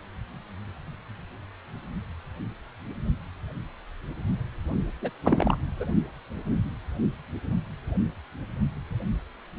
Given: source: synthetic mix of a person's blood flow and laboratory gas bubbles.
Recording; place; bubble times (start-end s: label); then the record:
Doppler ultrasound of blood flow; precordium
5.02-5.10 s: bubbles
5.24-5.58 s: bubbles
5.79-5.85 s: bubbles
From the record:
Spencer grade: 1 (occasional bubble signal discernible with the cardiac motion signal, with majority of cardiac periods free of bubbles); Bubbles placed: only in the low amplitude regions of the cardiac cycle